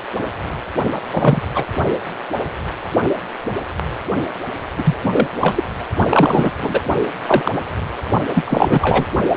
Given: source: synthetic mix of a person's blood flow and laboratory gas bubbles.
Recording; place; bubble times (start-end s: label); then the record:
Doppler ultrasound of blood flow; precordium
0.92-0.98 s: bubbles
1.10-1.42 s: bubbles
1.54-1.66 s: bubbles
4.78-4.95 s: bubbles
5.04-5.27 s: bubbles
5.41-5.64 s: bubbles
6.10-6.51 s: bubbles
6.62-6.83 s: bubbles
7.27-7.58 s: bubbles
8.34-9.06 s: bubbles
From the record:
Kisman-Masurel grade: 233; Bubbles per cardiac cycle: several, 3 to 8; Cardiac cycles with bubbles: 50 to 99%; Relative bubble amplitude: loud (0.450 to 0.775); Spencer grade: 3 (all of the cardiac periods contain showers or single bubble signals, but not dominating or overriding the cardiac motion signals); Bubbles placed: only in the low amplitude regions of the cardiac cycle